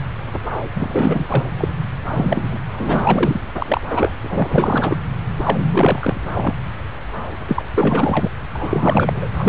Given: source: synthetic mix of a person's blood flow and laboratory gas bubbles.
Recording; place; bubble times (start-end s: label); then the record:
Doppler ultrasound of blood flow; subclavian vein
0.75-1.26 s: bubbles
1.30-1.45 s: bubbles
1.58-1.68 s: bubbles
2.11-2.58 s: bubbles
2.72-3.39 s: bubbles
3.57-3.81 s: bubbles
3.90-4.14 s: bubbles
4.22-4.97 s: bubbles
5.38-6.54 s: bubbles
7.47-7.62 s: bubbles
7.75-8.29 s: bubbles
8.53-9.28 s: bubbles
9.38-9.49 s: bubbles
From the record:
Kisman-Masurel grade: 333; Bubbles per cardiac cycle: rolling drumbeat, 9 or more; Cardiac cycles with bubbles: 50 to 99%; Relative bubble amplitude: loud (0.450 to 0.775); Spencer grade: 3 (all of the cardiac periods contain showers or single bubble signals, but not dominating or overriding the cardiac motion signals); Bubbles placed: anywhere in the cardiac cycle